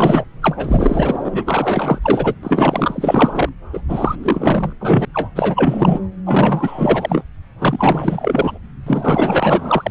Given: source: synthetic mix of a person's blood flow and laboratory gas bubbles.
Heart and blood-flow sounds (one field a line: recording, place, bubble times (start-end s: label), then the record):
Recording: Doppler ultrasound of blood flow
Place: subclavian vein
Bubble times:
0.00-0.27 s: bubbles
0.41-1.44 s: bubbles
1.46-1.99 s: bubbles
2.02-2.35 s: bubbles
2.43-3.49 s: bubbles
3.73-3.82 s: bubbles
3.89-4.16 s: bubbles
4.23-4.73 s: bubbles
4.79-5.05 s: bubbles
5.13-5.29 s: bubbles
5.35-6.00 s: bubbles
6.25-7.24 s: bubbles
7.58-8.59 s: bubbles
8.87-9.91 s: bubbles
From the record:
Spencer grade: 4 (maximum detectable bubble signal sounding continuously throughout systole and diastole of every cardiac period, and overriding the amplitude of the normal cardiac signals)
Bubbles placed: anywhere in the cardiac cycle